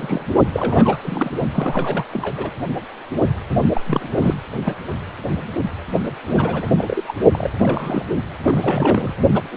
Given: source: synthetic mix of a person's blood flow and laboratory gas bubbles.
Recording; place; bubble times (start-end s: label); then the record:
Doppler ultrasound of blood flow; precordium
0.00-0.31 s: bubbles
0.53-0.97 s: bubbles
1.03-1.30 s: bubbles
1.54-2.05 s: bubbles
2.10-2.50 s: bubbles
3.73-3.81 s: bubbles
3.86-4.08 s: bubbles
4.20-4.35 s: bubbles
4.64-4.76 s: bubbles
6.07-6.12 s: bubbles
6.26-6.71 s: bubbles
6.78-7.04 s: bubbles
7.08-7.15 s: bubbles
7.33-7.50 s: bubbles
7.58-8.04 s: bubbles
8.46-9.13 s: bubbles
9.34-9.44 s: bubbles
9.51-9.57 s: bubbles
From the record:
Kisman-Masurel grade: 332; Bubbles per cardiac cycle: rolling drumbeat, 9 or more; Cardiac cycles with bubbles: 50 to 99%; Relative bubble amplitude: moderate (0.250 to 0.450); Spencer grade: 3 (all of the cardiac periods contain showers or single bubble signals, but not dominating or overriding the cardiac motion signals); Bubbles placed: only in the low amplitude regions of the cardiac cycle